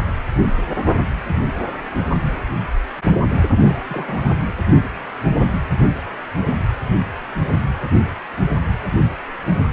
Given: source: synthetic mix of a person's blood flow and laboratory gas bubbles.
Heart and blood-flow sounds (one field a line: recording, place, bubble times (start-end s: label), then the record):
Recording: Doppler ultrasound of blood flow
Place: precordium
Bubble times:
3.60-4.31 s: bubbles
From the record:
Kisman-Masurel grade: 111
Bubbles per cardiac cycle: 1 to 2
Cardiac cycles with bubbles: 1 to 10%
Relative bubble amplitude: barely perceptible (0.100 to 0.250)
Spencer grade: 1 (occasional bubble signal discernible with the cardiac motion signal, with majority of cardiac periods free of bubbles)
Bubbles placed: anywhere in the cardiac cycle